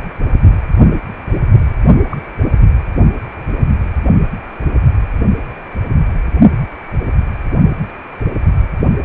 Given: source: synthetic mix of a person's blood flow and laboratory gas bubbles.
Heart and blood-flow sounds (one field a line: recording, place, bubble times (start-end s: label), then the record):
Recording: Doppler ultrasound of blood flow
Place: precordium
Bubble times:
2.10-2.19 s: bubbles
From the record:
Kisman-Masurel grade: 112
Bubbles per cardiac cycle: 1 to 2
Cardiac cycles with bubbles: 1 to 10%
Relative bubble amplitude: moderate (0.250 to 0.450)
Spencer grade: 1 (occasional bubble signal discernible with the cardiac motion signal, with majority of cardiac periods free of bubbles)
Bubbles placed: only in the low amplitude regions of the cardiac cycle